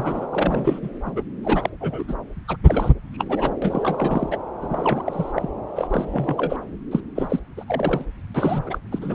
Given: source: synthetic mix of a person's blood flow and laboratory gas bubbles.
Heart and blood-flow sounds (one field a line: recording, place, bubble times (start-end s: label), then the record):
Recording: Doppler ultrasound of blood flow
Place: subclavian vein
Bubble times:
0.00-0.27 s: bubbles
0.32-0.79 s: bubbles
0.82-0.89 s: bubbles
1.04-1.12 s: bubbles
1.16-1.23 s: bubbles
1.43-1.70 s: bubbles
1.81-2.04 s: bubbles
2.08-2.14 s: bubbles
2.48-2.56 s: bubbles
2.67-2.91 s: bubbles
3.13-3.50 s: bubbles
3.62-4.37 s: bubbles
4.60-5.32 s: bubbles
5.36-5.50 s: bubbles
5.75-5.88 s: bubbles
5.90-6.56 s: bubbles
6.91-7.00 s: bubbles
7.16-7.39 s: bubbles
7.57-8.05 s: bubbles
8.34-8.63 s: bubbles
8.66-8.79 s: bubbles
8.92-8.99 s: bubbles
9.02-9.15 s: bubbles
From the record:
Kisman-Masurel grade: 342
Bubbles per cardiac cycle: rolling drumbeat, 9 or more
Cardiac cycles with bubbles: 100%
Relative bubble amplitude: moderate (0.250 to 0.450)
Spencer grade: 3 (all of the cardiac periods contain showers or single bubble signals, but not dominating or overriding the cardiac motion signals)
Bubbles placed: anywhere in the cardiac cycle